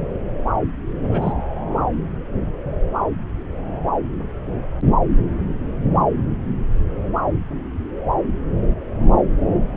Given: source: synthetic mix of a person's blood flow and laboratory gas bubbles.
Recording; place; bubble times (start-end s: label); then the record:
Doppler ultrasound of blood flow; subclavian vein
1.09-1.32 s: bubbles
From the record:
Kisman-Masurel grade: 121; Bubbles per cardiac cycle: 1 to 2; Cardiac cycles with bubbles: 10 to 50%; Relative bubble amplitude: barely perceptible (0.100 to 0.250); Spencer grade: 2 (many but less than half of the cardiac periods contain bubble signals, singularly or in groups); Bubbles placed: anywhere in the cardiac cycle